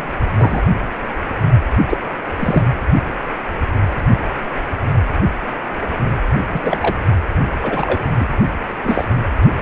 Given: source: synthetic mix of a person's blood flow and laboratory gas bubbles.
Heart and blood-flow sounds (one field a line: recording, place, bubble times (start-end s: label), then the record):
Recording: Doppler ultrasound of blood flow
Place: precordium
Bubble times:
0.00-0.04 s: bubbles
0.38-0.61 s: bubbles
1.89-1.97 s: bubbles
2.38-2.66 s: bubbles
6.54-6.79 s: bubbles
6.82-6.96 s: bubbles
7.62-8.02 s: bubbles
8.20-8.27 s: bubbles
8.84-9.04 s: bubbles
From the record:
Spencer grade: 2 (many but less than half of the cardiac periods contain bubble signals, singularly or in groups)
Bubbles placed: anywhere in the cardiac cycle